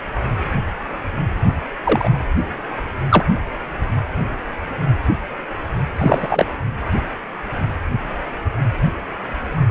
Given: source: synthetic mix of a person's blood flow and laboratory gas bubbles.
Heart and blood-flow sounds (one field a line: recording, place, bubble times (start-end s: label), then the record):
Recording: Doppler ultrasound of blood flow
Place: precordium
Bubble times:
1.83-2.10 s: bubbles
3.10-3.25 s: bubbles
5.96-6.46 s: bubbles
From the record:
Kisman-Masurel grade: 223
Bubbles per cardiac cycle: several, 3 to 8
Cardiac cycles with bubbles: 10 to 50%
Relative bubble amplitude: loud (0.450 to 0.775)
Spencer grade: 2 (many but less than half of the cardiac periods contain bubble signals, singularly or in groups)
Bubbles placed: anywhere in the cardiac cycle